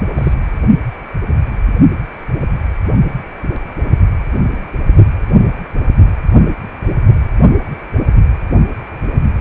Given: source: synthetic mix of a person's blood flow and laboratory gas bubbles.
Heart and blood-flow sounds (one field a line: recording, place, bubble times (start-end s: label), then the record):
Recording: Doppler ultrasound of blood flow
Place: precordium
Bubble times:
0.15-0.33 s: bubbles
From the record:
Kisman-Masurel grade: 212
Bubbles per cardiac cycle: several, 3 to 8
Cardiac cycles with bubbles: 1 to 10%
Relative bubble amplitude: moderate (0.250 to 0.450)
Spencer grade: 1 (occasional bubble signal discernible with the cardiac motion signal, with majority of cardiac periods free of bubbles)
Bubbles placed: anywhere in the cardiac cycle